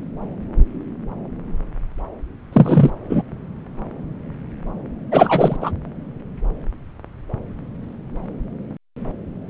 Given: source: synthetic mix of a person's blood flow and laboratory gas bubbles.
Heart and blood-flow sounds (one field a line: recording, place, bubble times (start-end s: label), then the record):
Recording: Doppler ultrasound of blood flow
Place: subclavian vein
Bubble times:
2.52-2.90 s: bubbles
3.09-3.23 s: bubbles
5.12-5.57 s: bubbles
5.61-5.71 s: bubbles
From the record:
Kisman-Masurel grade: 223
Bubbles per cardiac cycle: several, 3 to 8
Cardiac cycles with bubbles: 10 to 50%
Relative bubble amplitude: loud (0.450 to 0.775)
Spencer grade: 2 (many but less than half of the cardiac periods contain bubble signals, singularly or in groups)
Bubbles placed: anywhere in the cardiac cycle